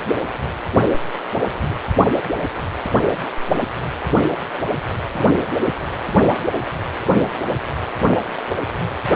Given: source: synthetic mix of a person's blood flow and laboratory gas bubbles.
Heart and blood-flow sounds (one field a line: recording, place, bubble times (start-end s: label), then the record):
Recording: Doppler ultrasound of blood flow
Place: precordium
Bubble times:
1.64-1.75 s: bubbles
5.15-5.24 s: bubbles
From the record:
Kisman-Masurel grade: 122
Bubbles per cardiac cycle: 1 to 2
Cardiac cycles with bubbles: 10 to 50%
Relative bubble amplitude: moderate (0.250 to 0.450)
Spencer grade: 2 (many but less than half of the cardiac periods contain bubble signals, singularly or in groups)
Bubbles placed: only in the low amplitude regions of the cardiac cycle